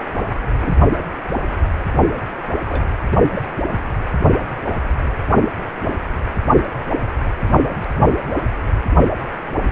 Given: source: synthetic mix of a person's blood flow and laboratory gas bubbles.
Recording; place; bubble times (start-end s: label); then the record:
Doppler ultrasound of blood flow; precordium
0.14-0.21 s: bubbles
0.60-0.76 s: bubbles
2.65-2.85 s: bubbles
3.31-3.40 s: bubbles
3.69-3.74 s: bubbles
From the record:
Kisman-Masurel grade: 121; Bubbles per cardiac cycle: 1 to 2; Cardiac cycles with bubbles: 10 to 50%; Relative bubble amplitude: barely perceptible (0.100 to 0.250); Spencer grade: 2 (many but less than half of the cardiac periods contain bubble signals, singularly or in groups); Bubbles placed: anywhere in the cardiac cycle